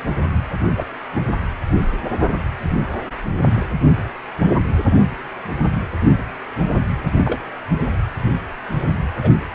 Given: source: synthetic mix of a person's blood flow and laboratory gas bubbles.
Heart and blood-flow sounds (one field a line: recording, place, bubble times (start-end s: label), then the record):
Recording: Doppler ultrasound of blood flow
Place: precordium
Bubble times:
0.76-0.86 s: bubbles
1.15-1.21 s: bubbles
7.16-7.39 s: bubbles
9.22-9.30 s: bubbles
From the record:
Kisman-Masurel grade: 122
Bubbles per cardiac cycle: 1 to 2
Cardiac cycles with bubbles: 10 to 50%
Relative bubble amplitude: moderate (0.250 to 0.450)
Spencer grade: 2 (many but less than half of the cardiac periods contain bubble signals, singularly or in groups)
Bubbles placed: anywhere in the cardiac cycle